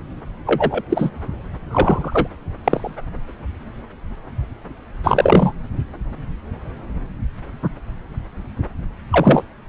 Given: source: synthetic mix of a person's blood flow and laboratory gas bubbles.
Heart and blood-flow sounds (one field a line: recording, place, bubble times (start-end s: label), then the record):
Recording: Doppler ultrasound of blood flow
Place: subclavian vein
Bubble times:
0.46-0.82 s: bubbles
0.90-1.10 s: bubbles
1.70-2.27 s: bubbles
2.64-2.96 s: bubbles
5.04-5.53 s: bubbles
9.12-9.44 s: bubbles
From the record:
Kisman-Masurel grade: 223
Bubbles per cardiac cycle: several, 3 to 8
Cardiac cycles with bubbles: 10 to 50%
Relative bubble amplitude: loud (0.450 to 0.775)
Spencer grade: 2 (many but less than half of the cardiac periods contain bubble signals, singularly or in groups)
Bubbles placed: anywhere in the cardiac cycle